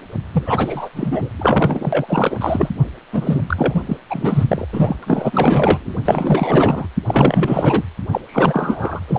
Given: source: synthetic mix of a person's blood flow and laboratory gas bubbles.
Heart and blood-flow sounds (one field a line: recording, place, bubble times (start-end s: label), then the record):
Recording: Doppler ultrasound of blood flow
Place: precordium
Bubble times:
0.33-0.89 s: bubbles
0.92-1.29 s: bubbles
1.39-2.69 s: bubbles
3.12-3.41 s: bubbles
3.47-3.84 s: bubbles
3.87-3.97 s: bubbles
4.10-4.44 s: bubbles
4.48-4.67 s: bubbles
4.73-4.96 s: bubbles
5.03-6.01 s: bubbles
6.04-6.87 s: bubbles
7.07-7.84 s: bubbles
8.11-8.21 s: bubbles
8.27-9.00 s: bubbles
9.07-9.19 s: bubbles
From the record:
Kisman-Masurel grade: 444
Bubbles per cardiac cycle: continuous sound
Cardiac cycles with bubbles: 100%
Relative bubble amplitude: maximal (0.775 to 0.999)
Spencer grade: 4 (maximum detectable bubble signal sounding continuously throughout systole and diastole of every cardiac period, and overriding the amplitude of the normal cardiac signals)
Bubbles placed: anywhere in the cardiac cycle